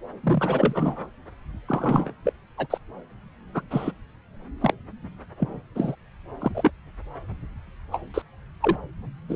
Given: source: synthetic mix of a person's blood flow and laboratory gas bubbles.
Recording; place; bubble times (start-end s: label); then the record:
Doppler ultrasound of blood flow; subclavian vein
0.23-1.08 s: bubbles
1.68-2.11 s: bubbles
2.25-2.32 s: bubbles
2.57-2.67 s: bubbles
2.70-2.78 s: bubbles
3.54-3.61 s: bubbles
3.70-3.91 s: bubbles
4.61-4.74 s: bubbles
5.38-5.62 s: bubbles
5.75-5.96 s: bubbles
6.41-6.51 s: bubbles
6.54-6.71 s: bubbles
7.92-8.01 s: bubbles
8.14-8.22 s: bubbles
8.61-8.77 s: bubbles
9.29-9.36 s: bubbles
From the record:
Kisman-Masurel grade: 232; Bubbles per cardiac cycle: several, 3 to 8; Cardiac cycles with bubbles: 50 to 99%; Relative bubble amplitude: moderate (0.250 to 0.450); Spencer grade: 3 (all of the cardiac periods contain showers or single bubble signals, but not dominating or overriding the cardiac motion signals); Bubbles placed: anywhere in the cardiac cycle